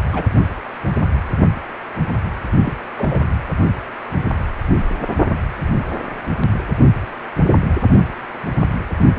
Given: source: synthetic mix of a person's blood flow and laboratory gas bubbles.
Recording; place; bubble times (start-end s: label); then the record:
Doppler ultrasound of blood flow; precordium
0.13-0.23 s: bubbles
2.64-2.77 s: bubbles
2.96-3.21 s: bubbles
From the record:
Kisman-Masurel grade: 122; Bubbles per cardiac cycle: 1 to 2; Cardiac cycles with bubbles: 10 to 50%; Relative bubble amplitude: moderate (0.250 to 0.450); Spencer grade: 2 (many but less than half of the cardiac periods contain bubble signals, singularly or in groups); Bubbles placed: only in the low amplitude regions of the cardiac cycle